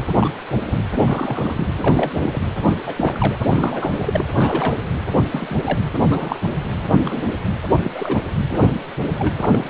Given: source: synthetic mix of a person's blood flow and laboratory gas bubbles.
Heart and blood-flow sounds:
Doppler ultrasound of blood flow; precordium
0.20-0.33 s: bubbles
0.52-0.64 s: bubbles
0.66-0.79 s: bubbles
1.04-1.68 s: bubbles
1.76-2.42 s: bubbles
2.86-3.39 s: bubbles
3.47-4.25 s: bubbles
4.38-4.75 s: bubbles
5.29-5.79 s: bubbles
6.08-6.38 s: bubbles
6.79-7.23 s: bubbles
7.81-7.92 s: bubbles
7.94-8.20 s: bubbles
8.49-8.79 s: bubbles
9.04-9.33 s: bubbles
9.39-9.70 s: bubbles
From the record:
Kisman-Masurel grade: 242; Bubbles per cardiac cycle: several, 3 to 8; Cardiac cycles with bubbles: 100%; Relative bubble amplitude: moderate (0.250 to 0.450); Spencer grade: 3 (all of the cardiac periods contain showers or single bubble signals, but not dominating or overriding the cardiac motion signals); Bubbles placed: anywhere in the cardiac cycle

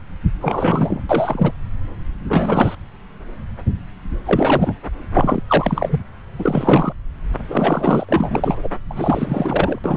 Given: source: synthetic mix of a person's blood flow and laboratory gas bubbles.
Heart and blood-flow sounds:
Doppler ultrasound of blood flow; subclavian vein
0.40-1.02 s: bubbles
1.09-1.52 s: bubbles
2.27-2.75 s: bubbles
4.25-4.74 s: bubbles
5.14-5.42 s: bubbles
5.48-6.01 s: bubbles
6.39-6.93 s: bubbles
7.50-8.05 s: bubbles
8.09-8.69 s: bubbles
8.90-9.79 s: bubbles
9.84-9.97 s: bubbles
From the record:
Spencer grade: 3 (all of the cardiac periods contain showers or single bubble signals, but not dominating or overriding the cardiac motion signals); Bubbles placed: anywhere in the cardiac cycle

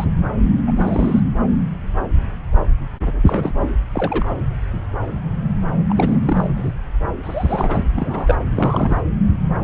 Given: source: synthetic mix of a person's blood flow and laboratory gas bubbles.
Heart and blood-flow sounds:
Doppler ultrasound of blood flow; subclavian vein
0.00-0.04 s: bubbles
0.67-0.72 s: bubbles
0.76-1.20 s: bubbles
3.25-3.69 s: bubbles
3.94-4.38 s: bubbles
5.89-6.48 s: bubbles
6.56-6.72 s: bubbles
7.23-7.88 s: bubbles
7.96-8.36 s: bubbles
8.50-9.02 s: bubbles
From the record:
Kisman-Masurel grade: 222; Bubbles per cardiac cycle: several, 3 to 8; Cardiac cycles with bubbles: 10 to 50%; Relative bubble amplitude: moderate (0.250 to 0.450); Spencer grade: 2 (many but less than half of the cardiac periods contain bubble signals, singularly or in groups); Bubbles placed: anywhere in the cardiac cycle

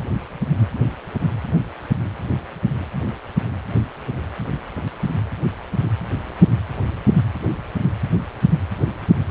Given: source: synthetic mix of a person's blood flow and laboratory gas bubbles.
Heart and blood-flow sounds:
Doppler ultrasound of blood flow; precordium
no bubbles
From the record:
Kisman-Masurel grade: 000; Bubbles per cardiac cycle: 0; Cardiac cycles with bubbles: 0%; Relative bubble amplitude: no bubbles discernible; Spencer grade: 0 (complete lack of bubble signals)

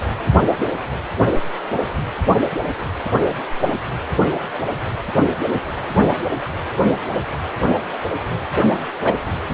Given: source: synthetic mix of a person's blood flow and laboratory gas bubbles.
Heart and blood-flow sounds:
Doppler ultrasound of blood flow; precordium
9.04-9.14 s: bubbles
From the record:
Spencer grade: 1 (occasional bubble signal discernible with the cardiac motion signal, with majority of cardiac periods free of bubbles); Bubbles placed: only in the low amplitude regions of the cardiac cycle

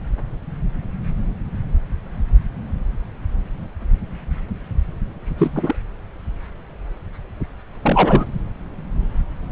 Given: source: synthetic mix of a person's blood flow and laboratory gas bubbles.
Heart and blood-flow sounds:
Doppler ultrasound of blood flow; subclavian vein
5.38-5.75 s: bubbles
7.83-8.26 s: bubbles
From the record:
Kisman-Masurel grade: 212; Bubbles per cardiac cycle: several, 3 to 8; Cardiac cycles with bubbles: 1 to 10%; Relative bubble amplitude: moderate (0.250 to 0.450); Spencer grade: 1 (occasional bubble signal discernible with the cardiac motion signal, with majority of cardiac periods free of bubbles); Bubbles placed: anywhere in the cardiac cycle

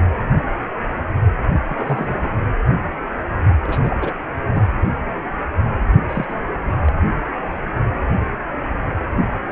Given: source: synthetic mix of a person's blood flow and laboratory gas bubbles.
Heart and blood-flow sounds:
Doppler ultrasound of blood flow; precordium
1.66-2.17 s: bubbles
2.23-2.30 s: bubbles
3.62-3.97 s: bubbles
4.00-4.11 s: bubbles
4.54-4.62 s: bubbles
5.65-5.70 s: bubbles
6.09-6.25 s: bubbles
6.29-6.46 s: bubbles
6.83-6.92 s: bubbles
From the record:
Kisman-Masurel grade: 222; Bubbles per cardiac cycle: several, 3 to 8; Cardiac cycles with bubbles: 10 to 50%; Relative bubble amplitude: moderate (0.250 to 0.450); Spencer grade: 2 (many but less than half of the cardiac periods contain bubble signals, singularly or in groups); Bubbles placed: anywhere in the cardiac cycle

